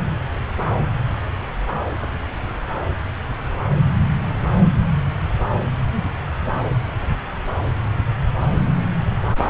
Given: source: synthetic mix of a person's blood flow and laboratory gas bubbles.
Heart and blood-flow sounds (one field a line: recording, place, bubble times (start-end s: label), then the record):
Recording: Doppler ultrasound of blood flow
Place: subclavian vein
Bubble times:
no bubbles
From the record:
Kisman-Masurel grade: 000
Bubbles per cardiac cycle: 0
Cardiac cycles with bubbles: 0%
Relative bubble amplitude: no bubbles discernible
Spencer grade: 0 (complete lack of bubble signals)